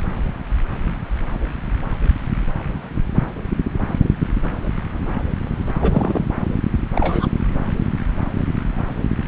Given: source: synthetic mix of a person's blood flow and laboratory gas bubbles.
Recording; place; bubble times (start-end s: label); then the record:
Doppler ultrasound of blood flow; subclavian vein
5.81-6.25 s: bubbles
6.96-7.27 s: bubbles
From the record:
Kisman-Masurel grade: 122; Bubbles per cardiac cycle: 1 to 2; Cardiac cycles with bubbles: 10 to 50%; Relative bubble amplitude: moderate (0.250 to 0.450); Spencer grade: 2 (many but less than half of the cardiac periods contain bubble signals, singularly or in groups); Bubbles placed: anywhere in the cardiac cycle